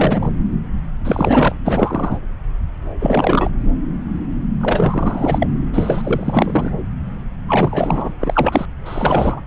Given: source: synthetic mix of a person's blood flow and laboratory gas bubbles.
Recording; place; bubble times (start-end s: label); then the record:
Doppler ultrasound of blood flow; subclavian vein
0.00-0.31 s: bubbles
1.04-1.55 s: bubbles
1.65-2.19 s: bubbles
3.00-3.50 s: bubbles
4.61-5.47 s: bubbles
5.74-6.71 s: bubbles
7.47-8.12 s: bubbles
8.20-8.65 s: bubbles
8.85-9.41 s: bubbles
From the record:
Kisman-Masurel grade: 333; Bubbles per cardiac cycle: rolling drumbeat, 9 or more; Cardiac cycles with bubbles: 50 to 99%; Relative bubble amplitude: loud (0.450 to 0.775); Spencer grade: 3 (all of the cardiac periods contain showers or single bubble signals, but not dominating or overriding the cardiac motion signals); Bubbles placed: anywhere in the cardiac cycle